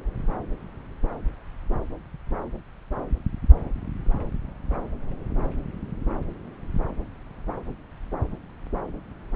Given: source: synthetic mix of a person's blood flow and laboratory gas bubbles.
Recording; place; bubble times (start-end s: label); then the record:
Doppler ultrasound of blood flow; subclavian vein
no bubbles
From the record:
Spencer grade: 0 (complete lack of bubble signals)